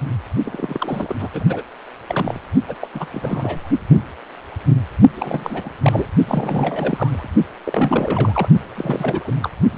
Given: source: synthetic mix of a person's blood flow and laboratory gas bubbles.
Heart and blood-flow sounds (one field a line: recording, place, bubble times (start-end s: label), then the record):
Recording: Doppler ultrasound of blood flow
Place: precordium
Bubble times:
0.45-1.16 s: bubbles
1.20-1.28 s: bubbles
1.33-1.62 s: bubbles
2.08-2.39 s: bubbles
2.68-2.75 s: bubbles
2.81-2.89 s: bubbles
2.94-3.06 s: bubbles
3.11-3.67 s: bubbles
5.14-5.69 s: bubbles
5.83-6.06 s: bubbles
6.27-7.29 s: bubbles
7.64-8.48 s: bubbles
8.75-9.31 s: bubbles
9.42-9.50 s: bubbles
9.72-9.78 s: bubbles
From the record:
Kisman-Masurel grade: 332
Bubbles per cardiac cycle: rolling drumbeat, 9 or more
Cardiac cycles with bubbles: 50 to 99%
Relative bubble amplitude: moderate (0.250 to 0.450)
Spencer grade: 3 (all of the cardiac periods contain showers or single bubble signals, but not dominating or overriding the cardiac motion signals)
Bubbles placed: only in the low amplitude regions of the cardiac cycle